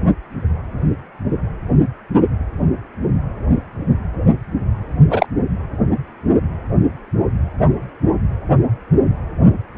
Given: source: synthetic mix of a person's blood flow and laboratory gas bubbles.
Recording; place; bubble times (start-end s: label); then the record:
Doppler ultrasound of blood flow; precordium
5.10-5.26 s: bubbles
From the record:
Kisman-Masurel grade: 113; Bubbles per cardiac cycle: 1 to 2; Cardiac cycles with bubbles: 1 to 10%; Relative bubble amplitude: loud (0.450 to 0.775); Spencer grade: 1 (occasional bubble signal discernible with the cardiac motion signal, with majority of cardiac periods free of bubbles); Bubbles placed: only in the low amplitude regions of the cardiac cycle